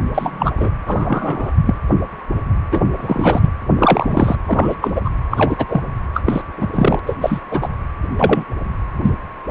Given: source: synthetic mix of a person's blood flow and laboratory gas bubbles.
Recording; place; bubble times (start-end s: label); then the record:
Doppler ultrasound of blood flow; precordium
0.14-0.52 s: bubbles
0.57-0.70 s: bubbles
0.86-1.52 s: bubbles
1.66-1.76 s: bubbles
2.72-2.81 s: bubbles
2.97-3.50 s: bubbles
3.79-4.35 s: bubbles
4.46-4.75 s: bubbles
4.81-5.01 s: bubbles
5.04-5.10 s: bubbles
5.30-5.65 s: bubbles
5.68-5.81 s: bubbles
6.13-6.42 s: bubbles
6.57-6.67 s: bubbles
6.72-7.00 s: bubbles
7.06-7.17 s: bubbles
7.21-7.40 s: bubbles
7.50-7.69 s: bubbles
8.18-8.45 s: bubbles
9.03-9.10 s: bubbles
From the record:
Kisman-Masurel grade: 233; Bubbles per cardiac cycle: several, 3 to 8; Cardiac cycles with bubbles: 50 to 99%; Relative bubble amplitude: loud (0.450 to 0.775); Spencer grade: 3 (all of the cardiac periods contain showers or single bubble signals, but not dominating or overriding the cardiac motion signals); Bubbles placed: anywhere in the cardiac cycle